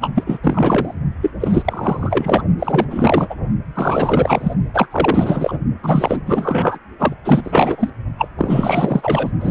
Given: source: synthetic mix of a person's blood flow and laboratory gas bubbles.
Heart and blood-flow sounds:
Doppler ultrasound of blood flow; precordium
0.01-0.12 s: bubbles
0.15-0.24 s: bubbles
0.26-0.38 s: bubbles
0.42-0.95 s: bubbles
1.21-1.31 s: bubbles
1.40-2.44 s: bubbles
2.59-2.86 s: bubbles
2.90-3.35 s: bubbles
3.75-4.54 s: bubbles
4.74-5.58 s: bubbles
5.83-6.21 s: bubbles
6.26-6.79 s: bubbles
6.99-7.14 s: bubbles
7.25-7.90 s: bubbles
8.18-8.28 s: bubbles
8.38-9.32 s: bubbles
9.40-9.51 s: bubbles
From the record:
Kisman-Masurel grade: 444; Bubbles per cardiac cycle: continuous sound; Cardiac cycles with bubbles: 100%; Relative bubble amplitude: maximal (0.775 to 0.999); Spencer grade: 4 (maximum detectable bubble signal sounding continuously throughout systole and diastole of every cardiac period, and overriding the amplitude of the normal cardiac signals); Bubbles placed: only in the low amplitude regions of the cardiac cycle

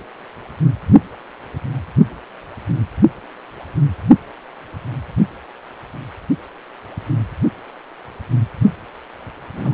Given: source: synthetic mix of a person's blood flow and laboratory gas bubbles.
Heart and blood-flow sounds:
Doppler ultrasound of blood flow; precordium
9.55-9.74 s: bubbles
From the record:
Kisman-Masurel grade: 211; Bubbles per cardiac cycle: several, 3 to 8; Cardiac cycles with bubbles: 1 to 10%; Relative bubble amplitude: barely perceptible (0.100 to 0.250); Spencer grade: 1 (occasional bubble signal discernible with the cardiac motion signal, with majority of cardiac periods free of bubbles); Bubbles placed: only in the low amplitude regions of the cardiac cycle

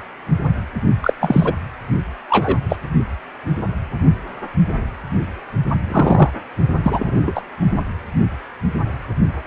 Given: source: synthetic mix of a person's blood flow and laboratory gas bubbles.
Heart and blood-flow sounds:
Doppler ultrasound of blood flow; precordium
1.01-1.14 s: bubbles
1.21-1.53 s: bubbles
2.30-2.58 s: bubbles
2.69-2.76 s: bubbles
5.86-6.30 s: bubbles
6.83-7.42 s: bubbles
From the record:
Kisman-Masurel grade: 223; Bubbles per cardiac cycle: several, 3 to 8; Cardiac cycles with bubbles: 10 to 50%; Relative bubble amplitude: loud (0.450 to 0.775); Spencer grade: 2 (many but less than half of the cardiac periods contain bubble signals, singularly or in groups); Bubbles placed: only in the low amplitude regions of the cardiac cycle

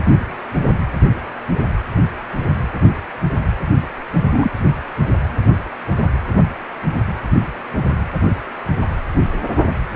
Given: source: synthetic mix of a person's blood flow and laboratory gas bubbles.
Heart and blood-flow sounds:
Doppler ultrasound of blood flow; precordium
4.32-4.50 s: bubbles
From the record:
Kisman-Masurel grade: 113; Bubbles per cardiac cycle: 1 to 2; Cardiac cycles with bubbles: 1 to 10%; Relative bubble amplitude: loud (0.450 to 0.775); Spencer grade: 1 (occasional bubble signal discernible with the cardiac motion signal, with majority of cardiac periods free of bubbles); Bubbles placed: anywhere in the cardiac cycle

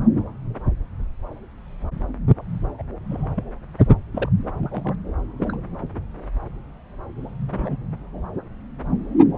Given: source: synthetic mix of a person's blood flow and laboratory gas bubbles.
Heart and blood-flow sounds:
Doppler ultrasound of blood flow; subclavian vein
2.78-2.82 s: bubbles
3.09-3.44 s: bubbles
3.78-3.82 s: bubbles
4.14-4.29 s: bubbles
4.61-4.95 s: bubbles
5.41-5.57 s: bubbles
7.48-7.78 s: bubbles
From the record:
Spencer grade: 2 (many but less than half of the cardiac periods contain bubble signals, singularly or in groups); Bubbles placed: anywhere in the cardiac cycle

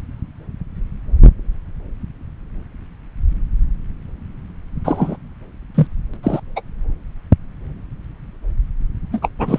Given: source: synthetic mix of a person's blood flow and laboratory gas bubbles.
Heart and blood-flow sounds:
Doppler ultrasound of blood flow; subclavian vein
4.84-5.17 s: bubbles
5.75-5.87 s: bubbles
6.13-6.17 s: bubbles
6.23-6.40 s: bubbles
6.56-6.62 s: bubbles
9.12-9.20 s: bubbles
9.22-9.29 s: bubbles
9.38-9.59 s: bubbles
From the record:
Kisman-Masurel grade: 223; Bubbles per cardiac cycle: several, 3 to 8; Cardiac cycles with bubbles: 10 to 50%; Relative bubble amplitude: loud (0.450 to 0.775); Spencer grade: 2 (many but less than half of the cardiac periods contain bubble signals, singularly or in groups); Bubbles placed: anywhere in the cardiac cycle

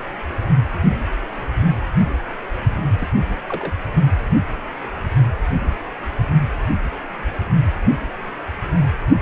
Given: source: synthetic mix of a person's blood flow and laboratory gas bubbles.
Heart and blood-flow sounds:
Doppler ultrasound of blood flow; precordium
2.99-3.08 s: bubbles
3.48-3.73 s: bubbles
From the record:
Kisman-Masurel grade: 111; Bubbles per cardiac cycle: 1 to 2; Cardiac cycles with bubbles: 1 to 10%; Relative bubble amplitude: barely perceptible (0.100 to 0.250); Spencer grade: 1 (occasional bubble signal discernible with the cardiac motion signal, with majority of cardiac periods free of bubbles); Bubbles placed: only in the low amplitude regions of the cardiac cycle

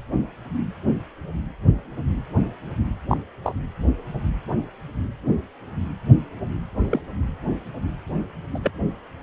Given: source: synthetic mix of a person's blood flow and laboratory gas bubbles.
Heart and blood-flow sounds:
Doppler ultrasound of blood flow; precordium
3.08-3.17 s: bubbles
3.44-3.53 s: bubbles
6.80-7.01 s: bubbles
8.54-8.59 s: bubbles
8.63-8.71 s: bubbles
From the record:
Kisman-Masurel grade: 122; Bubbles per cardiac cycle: 1 to 2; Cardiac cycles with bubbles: 10 to 50%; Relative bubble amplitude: moderate (0.250 to 0.450); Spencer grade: 2 (many but less than half of the cardiac periods contain bubble signals, singularly or in groups); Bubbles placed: anywhere in the cardiac cycle

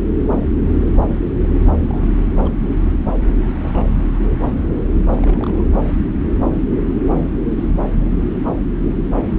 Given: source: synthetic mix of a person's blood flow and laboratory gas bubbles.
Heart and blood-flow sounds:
Doppler ultrasound of blood flow; subclavian vein
1.65-2.12 s: bubbles
2.30-2.52 s: bubbles
3.56-3.99 s: bubbles
5.15-5.73 s: bubbles
From the record:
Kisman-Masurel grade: 221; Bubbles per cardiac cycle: several, 3 to 8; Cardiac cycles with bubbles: 10 to 50%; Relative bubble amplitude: barely perceptible (0.100 to 0.250); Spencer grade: 2 (many but less than half of the cardiac periods contain bubble signals, singularly or in groups); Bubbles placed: anywhere in the cardiac cycle

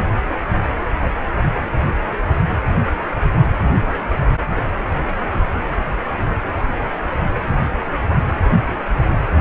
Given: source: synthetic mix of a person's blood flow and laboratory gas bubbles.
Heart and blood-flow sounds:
Doppler ultrasound of blood flow; precordium
5.06-5.15 s: bubbles
From the record:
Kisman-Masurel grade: 111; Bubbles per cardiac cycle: 1 to 2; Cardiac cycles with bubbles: 1 to 10%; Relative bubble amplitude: barely perceptible (0.100 to 0.250); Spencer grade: 1 (occasional bubble signal discernible with the cardiac motion signal, with majority of cardiac periods free of bubbles); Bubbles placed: anywhere in the cardiac cycle

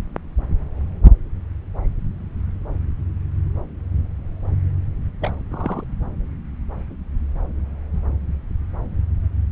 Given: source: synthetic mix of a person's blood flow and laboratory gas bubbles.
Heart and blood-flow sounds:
Doppler ultrasound of blood flow; subclavian vein
5.21-5.31 s: bubbles
5.50-5.83 s: bubbles
From the record:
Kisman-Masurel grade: 111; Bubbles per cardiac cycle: 1 to 2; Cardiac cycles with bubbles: 1 to 10%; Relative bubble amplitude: barely perceptible (0.100 to 0.250); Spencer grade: 1 (occasional bubble signal discernible with the cardiac motion signal, with majority of cardiac periods free of bubbles); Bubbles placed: anywhere in the cardiac cycle

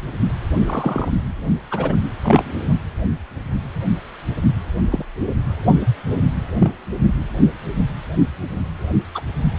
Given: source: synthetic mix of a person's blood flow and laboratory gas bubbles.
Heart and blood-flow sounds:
Doppler ultrasound of blood flow; precordium
0.59-1.10 s: bubbles
1.71-1.96 s: bubbles
2.23-2.69 s: bubbles
4.90-5.05 s: bubbles
6.59-6.71 s: bubbles
9.15-9.21 s: bubbles
From the record:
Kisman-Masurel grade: 122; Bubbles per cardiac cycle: 1 to 2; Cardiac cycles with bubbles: 10 to 50%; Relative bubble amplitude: moderate (0.250 to 0.450); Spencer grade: 2 (many but less than half of the cardiac periods contain bubble signals, singularly or in groups); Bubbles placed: anywhere in the cardiac cycle

